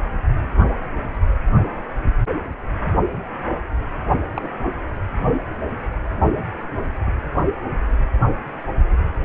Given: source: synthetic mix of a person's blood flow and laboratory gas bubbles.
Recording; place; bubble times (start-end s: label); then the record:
Doppler ultrasound of blood flow; precordium
4.34-4.47 s: bubbles
7.06-7.11 s: bubbles
From the record:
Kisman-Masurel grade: 121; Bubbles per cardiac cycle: 1 to 2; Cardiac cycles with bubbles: 10 to 50%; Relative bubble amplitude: barely perceptible (0.100 to 0.250); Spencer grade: 2 (many but less than half of the cardiac periods contain bubble signals, singularly or in groups); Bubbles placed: only in the low amplitude regions of the cardiac cycle